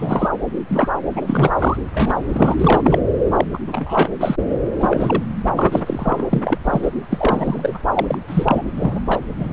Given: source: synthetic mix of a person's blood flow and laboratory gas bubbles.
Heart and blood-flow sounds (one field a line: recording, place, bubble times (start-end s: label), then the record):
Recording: Doppler ultrasound of blood flow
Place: subclavian vein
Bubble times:
0.00-0.29 s: bubbles
0.68-0.90 s: bubbles
1.16-1.51 s: bubbles
1.58-1.77 s: bubbles
1.92-2.55 s: bubbles
2.59-2.99 s: bubbles
3.37-3.46 s: bubbles
3.53-3.58 s: bubbles
3.67-4.08 s: bubbles
4.20-4.35 s: bubbles
4.79-5.23 s: bubbles
5.51-6.25 s: bubbles
6.29-6.58 s: bubbles
6.64-6.89 s: bubbles
7.10-7.79 s: bubbles
7.93-8.18 s: bubbles
8.28-8.63 s: bubbles
8.76-9.01 s: bubbles
9.06-9.23 s: bubbles
9.39-9.53 s: bubbles
From the record:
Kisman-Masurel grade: 243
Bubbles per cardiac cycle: several, 3 to 8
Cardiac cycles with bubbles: 100%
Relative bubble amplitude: loud (0.450 to 0.775)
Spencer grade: 3 (all of the cardiac periods contain showers or single bubble signals, but not dominating or overriding the cardiac motion signals)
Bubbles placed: anywhere in the cardiac cycle